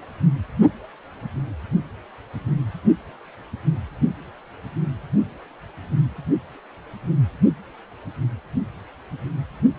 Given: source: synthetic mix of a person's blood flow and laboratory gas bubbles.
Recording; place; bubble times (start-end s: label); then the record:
Doppler ultrasound of blood flow; precordium
no bubbles
From the record:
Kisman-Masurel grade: 000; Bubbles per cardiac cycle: 0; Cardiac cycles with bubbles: 0%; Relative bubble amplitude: no bubbles discernible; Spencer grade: 0 (complete lack of bubble signals)